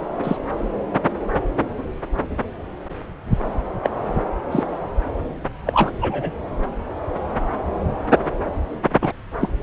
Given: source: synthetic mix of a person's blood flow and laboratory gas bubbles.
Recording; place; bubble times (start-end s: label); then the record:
Doppler ultrasound of blood flow; subclavian vein
0.24-0.37 s: bubbles
3.83-3.90 s: bubbles
4.51-4.63 s: bubbles
5.66-5.90 s: bubbles
6.01-6.32 s: bubbles
9.01-9.12 s: bubbles
9.41-9.51 s: bubbles
From the record:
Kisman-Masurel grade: 122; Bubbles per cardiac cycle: 1 to 2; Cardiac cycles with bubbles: 10 to 50%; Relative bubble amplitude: moderate (0.250 to 0.450); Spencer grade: 2 (many but less than half of the cardiac periods contain bubble signals, singularly or in groups); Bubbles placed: anywhere in the cardiac cycle